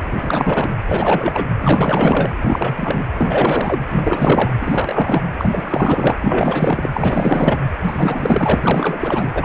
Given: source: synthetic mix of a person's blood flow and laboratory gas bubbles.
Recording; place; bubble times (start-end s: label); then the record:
Doppler ultrasound of blood flow; precordium
0.07-0.69 s: bubbles
0.86-1.45 s: bubbles
1.60-2.34 s: bubbles
2.40-3.04 s: bubbles
3.17-3.82 s: bubbles
3.90-4.53 s: bubbles
4.61-5.23 s: bubbles
5.38-6.17 s: bubbles
6.21-6.90 s: bubbles
6.94-7.58 s: bubbles
7.83-9.29 s: bubbles
9.34-9.45 s: bubbles
From the record:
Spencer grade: 4 (maximum detectable bubble signal sounding continuously throughout systole and diastole of every cardiac period, and overriding the amplitude of the normal cardiac signals); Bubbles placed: anywhere in the cardiac cycle